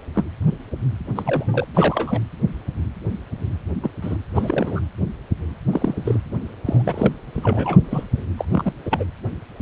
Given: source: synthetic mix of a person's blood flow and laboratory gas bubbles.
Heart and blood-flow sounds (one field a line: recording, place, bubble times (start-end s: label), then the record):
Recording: Doppler ultrasound of blood flow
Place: precordium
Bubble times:
0.13-0.24 s: bubbles
1.16-1.68 s: bubbles
1.74-2.21 s: bubbles
3.83-3.91 s: bubbles
4.01-4.17 s: bubbles
4.34-4.80 s: bubbles
5.73-6.20 s: bubbles
6.65-6.82 s: bubbles
6.84-7.13 s: bubbles
7.33-7.78 s: bubbles
7.84-8.03 s: bubbles
8.12-8.25 s: bubbles
8.37-8.44 s: bubbles
8.51-8.73 s: bubbles
8.85-9.04 s: bubbles
From the record:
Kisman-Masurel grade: 232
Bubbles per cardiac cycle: several, 3 to 8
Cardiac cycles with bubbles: 50 to 99%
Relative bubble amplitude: moderate (0.250 to 0.450)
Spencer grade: 3 (all of the cardiac periods contain showers or single bubble signals, but not dominating or overriding the cardiac motion signals)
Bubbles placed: anywhere in the cardiac cycle